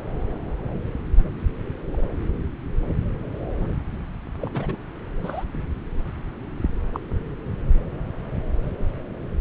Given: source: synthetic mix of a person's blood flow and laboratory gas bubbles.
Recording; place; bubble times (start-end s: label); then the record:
Doppler ultrasound of blood flow; subclavian vein
1.93-2.02 s: bubbles
4.42-4.77 s: bubbles
5.24-5.44 s: bubbles
6.93-7.00 s: bubbles
From the record:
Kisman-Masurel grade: 121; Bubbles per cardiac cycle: 1 to 2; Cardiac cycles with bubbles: 10 to 50%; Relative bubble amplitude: barely perceptible (0.100 to 0.250); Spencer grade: 2 (many but less than half of the cardiac periods contain bubble signals, singularly or in groups); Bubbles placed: anywhere in the cardiac cycle